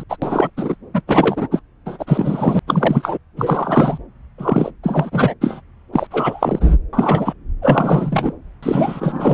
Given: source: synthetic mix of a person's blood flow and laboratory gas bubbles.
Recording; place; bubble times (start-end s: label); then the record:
Doppler ultrasound of blood flow; subclavian vein
0.00-0.04 s: bubbles
0.09-0.16 s: bubbles
0.22-0.50 s: bubbles
0.56-0.76 s: bubbles
0.94-1.02 s: bubbles
1.07-1.48 s: bubbles
1.51-1.60 s: bubbles
1.86-2.59 s: bubbles
2.67-3.17 s: bubbles
3.36-3.98 s: bubbles
4.38-4.71 s: bubbles
4.83-5.34 s: bubbles
5.41-5.61 s: bubbles
5.93-6.07 s: bubbles
6.11-6.75 s: bubbles
6.93-7.33 s: bubbles
7.62-8.33 s: bubbles
8.62-9.34 s: bubbles
From the record:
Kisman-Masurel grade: 343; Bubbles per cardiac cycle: rolling drumbeat, 9 or more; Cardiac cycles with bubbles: 100%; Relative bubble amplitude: loud (0.450 to 0.775); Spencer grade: 3 (all of the cardiac periods contain showers or single bubble signals, but not dominating or overriding the cardiac motion signals); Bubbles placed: anywhere in the cardiac cycle